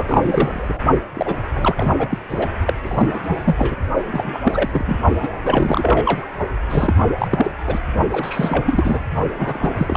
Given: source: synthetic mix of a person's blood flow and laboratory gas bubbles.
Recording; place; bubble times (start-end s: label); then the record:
Doppler ultrasound of blood flow; precordium
0.00-0.80 s: bubbles
1.15-1.34 s: bubbles
1.55-1.95 s: bubbles
1.98-2.18 s: bubbles
2.30-2.49 s: bubbles
2.66-2.74 s: bubbles
2.83-3.21 s: bubbles
3.24-3.76 s: bubbles
4.12-4.39 s: bubbles
4.44-4.69 s: bubbles
4.72-4.85 s: bubbles
4.87-4.99 s: bubbles
5.22-5.28 s: bubbles
5.43-6.25 s: bubbles
6.70-7.04 s: bubbles
7.18-7.51 s: bubbles
7.67-7.79 s: bubbles
8.12-9.04 s: bubbles
9.38-9.97 s: bubbles
From the record:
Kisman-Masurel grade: 343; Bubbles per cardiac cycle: rolling drumbeat, 9 or more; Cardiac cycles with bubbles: 100%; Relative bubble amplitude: loud (0.450 to 0.775); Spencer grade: 3 (all of the cardiac periods contain showers or single bubble signals, but not dominating or overriding the cardiac motion signals); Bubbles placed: only in the low amplitude regions of the cardiac cycle